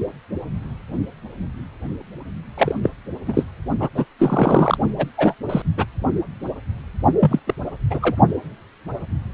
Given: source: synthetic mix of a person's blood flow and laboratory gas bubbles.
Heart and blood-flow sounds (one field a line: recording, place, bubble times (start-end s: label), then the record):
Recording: Doppler ultrasound of blood flow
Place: precordium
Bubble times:
2.57-2.90 s: bubbles
3.26-3.44 s: bubbles
3.79-3.89 s: bubbles
3.95-4.05 s: bubbles
4.19-4.78 s: bubbles
4.97-5.07 s: bubbles
5.17-5.34 s: bubbles
5.49-5.62 s: bubbles
5.78-5.86 s: bubbles
7.20-7.40 s: bubbles
7.47-7.54 s: bubbles
7.90-8.15 s: bubbles
From the record:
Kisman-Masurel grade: 223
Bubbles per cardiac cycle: several, 3 to 8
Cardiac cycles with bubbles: 10 to 50%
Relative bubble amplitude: loud (0.450 to 0.775)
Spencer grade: 2 (many but less than half of the cardiac periods contain bubble signals, singularly or in groups)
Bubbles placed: only in the low amplitude regions of the cardiac cycle